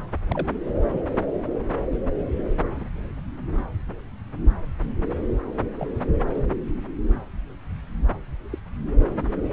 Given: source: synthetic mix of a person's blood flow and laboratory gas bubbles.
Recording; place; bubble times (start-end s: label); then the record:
Doppler ultrasound of blood flow; subclavian vein
0.30-0.47 s: bubbles
0.89-1.04 s: bubbles
1.91-1.98 s: bubbles
2.76-2.87 s: bubbles
5.79-5.88 s: bubbles
6.34-6.42 s: bubbles
8.52-8.58 s: bubbles
From the record:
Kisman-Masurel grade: 121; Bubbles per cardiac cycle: 1 to 2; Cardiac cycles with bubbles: 10 to 50%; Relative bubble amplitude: barely perceptible (0.100 to 0.250); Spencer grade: 2 (many but less than half of the cardiac periods contain bubble signals, singularly or in groups); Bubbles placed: anywhere in the cardiac cycle